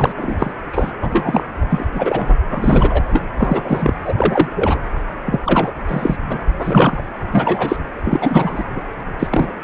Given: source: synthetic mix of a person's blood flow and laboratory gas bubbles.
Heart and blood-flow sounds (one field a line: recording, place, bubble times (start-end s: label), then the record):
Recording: Doppler ultrasound of blood flow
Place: precordium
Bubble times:
0.00-0.12 s: bubbles
0.15-0.54 s: bubbles
0.72-0.91 s: bubbles
1.01-1.44 s: bubbles
1.69-1.85 s: bubbles
1.94-2.36 s: bubbles
2.48-3.24 s: bubbles
3.37-3.94 s: bubbles
4.04-4.13 s: bubbles
4.17-4.49 s: bubbles
4.55-4.79 s: bubbles
5.25-5.39 s: bubbles
5.44-5.72 s: bubbles
5.88-6.17 s: bubbles
6.29-6.39 s: bubbles
6.58-7.01 s: bubbles
7.33-7.76 s: bubbles
8.04-8.66 s: bubbles
8.76-8.81 s: bubbles
9.19-9.28 s: bubbles
9.31-9.53 s: bubbles
From the record:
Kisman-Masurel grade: 343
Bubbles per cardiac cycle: rolling drumbeat, 9 or more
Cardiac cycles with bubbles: 100%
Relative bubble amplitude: loud (0.450 to 0.775)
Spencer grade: 3 (all of the cardiac periods contain showers or single bubble signals, but not dominating or overriding the cardiac motion signals)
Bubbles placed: anywhere in the cardiac cycle